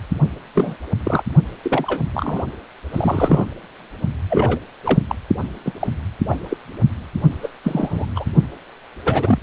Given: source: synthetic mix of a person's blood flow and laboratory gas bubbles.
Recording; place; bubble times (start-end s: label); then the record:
Doppler ultrasound of blood flow; precordium
0.55-0.77 s: bubbles
1.04-1.22 s: bubbles
1.63-2.00 s: bubbles
2.13-2.42 s: bubbles
2.92-3.45 s: bubbles
4.29-4.59 s: bubbles
4.83-4.99 s: bubbles
5.08-5.16 s: bubbles
5.64-5.72 s: bubbles
5.79-5.88 s: bubbles
6.29-6.38 s: bubbles
6.50-6.57 s: bubbles
7.42-7.49 s: bubbles
7.64-8.06 s: bubbles
8.16-8.25 s: bubbles
9.04-9.39 s: bubbles
From the record:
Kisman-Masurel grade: 233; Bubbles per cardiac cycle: several, 3 to 8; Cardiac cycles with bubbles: 50 to 99%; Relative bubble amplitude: loud (0.450 to 0.775); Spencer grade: 3 (all of the cardiac periods contain showers or single bubble signals, but not dominating or overriding the cardiac motion signals); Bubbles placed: only in the low amplitude regions of the cardiac cycle